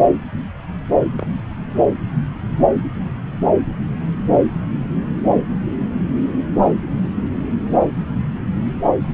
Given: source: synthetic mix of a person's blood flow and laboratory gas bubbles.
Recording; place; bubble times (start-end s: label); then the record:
Doppler ultrasound of blood flow; subclavian vein
1.17-1.27 s: bubbles
From the record:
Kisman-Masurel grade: 111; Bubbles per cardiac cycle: 1 to 2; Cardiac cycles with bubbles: 1 to 10%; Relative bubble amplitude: barely perceptible (0.100 to 0.250); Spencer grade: 1 (occasional bubble signal discernible with the cardiac motion signal, with majority of cardiac periods free of bubbles); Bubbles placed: anywhere in the cardiac cycle